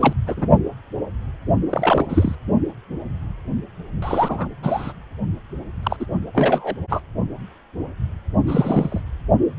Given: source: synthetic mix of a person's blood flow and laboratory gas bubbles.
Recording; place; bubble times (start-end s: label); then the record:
Doppler ultrasound of blood flow; precordium
0.00-0.13 s: bubbles
0.26-0.49 s: bubbles
1.70-2.06 s: bubbles
2.09-2.35 s: bubbles
4.02-4.47 s: bubbles
4.62-4.93 s: bubbles
5.83-5.96 s: bubbles
5.99-6.05 s: bubbles
6.34-6.75 s: bubbles
6.89-7.01 s: bubbles
8.46-9.01 s: bubbles
From the record:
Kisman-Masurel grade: 232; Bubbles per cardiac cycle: several, 3 to 8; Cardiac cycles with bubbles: 50 to 99%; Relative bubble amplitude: moderate (0.250 to 0.450); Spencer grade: 3 (all of the cardiac periods contain showers or single bubble signals, but not dominating or overriding the cardiac motion signals); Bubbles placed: only in the low amplitude regions of the cardiac cycle